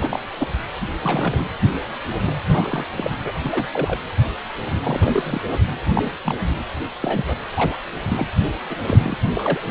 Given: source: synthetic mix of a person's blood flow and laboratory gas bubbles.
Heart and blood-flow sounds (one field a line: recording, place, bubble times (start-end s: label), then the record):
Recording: Doppler ultrasound of blood flow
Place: precordium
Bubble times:
0.00-0.20 s: bubbles
0.38-0.48 s: bubbles
1.02-1.49 s: bubbles
2.25-2.36 s: bubbles
2.45-2.85 s: bubbles
2.96-3.10 s: bubbles
3.24-3.32 s: bubbles
3.45-3.67 s: bubbles
3.73-3.98 s: bubbles
4.71-5.41 s: bubbles
5.94-6.12 s: bubbles
6.25-6.38 s: bubbles
7.00-7.43 s: bubbles
7.54-7.79 s: bubbles
8.08-8.27 s: bubbles
8.69-8.76 s: bubbles
8.79-9.18 s: bubbles
9.35-9.60 s: bubbles
From the record:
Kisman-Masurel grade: 242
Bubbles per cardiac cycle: several, 3 to 8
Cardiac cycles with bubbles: 100%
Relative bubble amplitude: moderate (0.250 to 0.450)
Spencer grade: 3 (all of the cardiac periods contain showers or single bubble signals, but not dominating or overriding the cardiac motion signals)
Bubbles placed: anywhere in the cardiac cycle